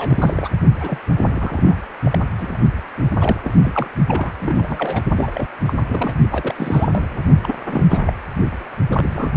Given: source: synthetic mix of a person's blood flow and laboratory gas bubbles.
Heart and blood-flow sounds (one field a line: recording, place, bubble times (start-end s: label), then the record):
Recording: Doppler ultrasound of blood flow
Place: precordium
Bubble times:
0.00-0.48 s: bubbles
0.78-0.98 s: bubbles
1.21-1.76 s: bubbles
2.04-2.18 s: bubbles
2.39-2.58 s: bubbles
2.97-3.02 s: bubbles
3.21-3.60 s: bubbles
3.63-3.88 s: bubbles
4.08-4.32 s: bubbles
4.40-5.03 s: bubbles
5.16-5.31 s: bubbles
5.34-5.49 s: bubbles
5.66-5.74 s: bubbles
5.88-6.17 s: bubbles
6.31-7.22 s: bubbles
7.42-7.54 s: bubbles
7.67-7.86 s: bubbles
7.89-8.13 s: bubbles
8.89-9.31 s: bubbles
From the record:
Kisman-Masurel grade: 332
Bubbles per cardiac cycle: rolling drumbeat, 9 or more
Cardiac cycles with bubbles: 50 to 99%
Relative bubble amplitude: moderate (0.250 to 0.450)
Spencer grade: 3 (all of the cardiac periods contain showers or single bubble signals, but not dominating or overriding the cardiac motion signals)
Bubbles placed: only in the low amplitude regions of the cardiac cycle